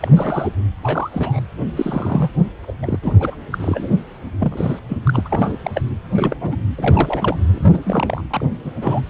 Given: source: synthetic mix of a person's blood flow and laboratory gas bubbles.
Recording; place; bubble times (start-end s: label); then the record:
Doppler ultrasound of blood flow; precordium
0.00-0.49 s: bubbles
0.82-1.40 s: bubbles
1.76-2.31 s: bubbles
2.63-2.73 s: bubbles
2.82-2.98 s: bubbles
3.02-3.14 s: bubbles
3.19-3.35 s: bubbles
3.51-3.88 s: bubbles
4.40-4.79 s: bubbles
4.88-4.98 s: bubbles
5.04-5.21 s: bubbles
5.25-5.58 s: bubbles
5.65-5.71 s: bubbles
5.75-5.82 s: bubbles
6.15-6.36 s: bubbles
6.40-6.58 s: bubbles
6.75-7.38 s: bubbles
7.51-8.22 s: bubbles
8.30-8.47 s: bubbles
8.65-8.72 s: bubbles
8.81-9.01 s: bubbles
From the record:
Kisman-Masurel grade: 232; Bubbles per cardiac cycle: several, 3 to 8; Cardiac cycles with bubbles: 50 to 99%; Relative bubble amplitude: moderate (0.250 to 0.450); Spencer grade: 3 (all of the cardiac periods contain showers or single bubble signals, but not dominating or overriding the cardiac motion signals); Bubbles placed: anywhere in the cardiac cycle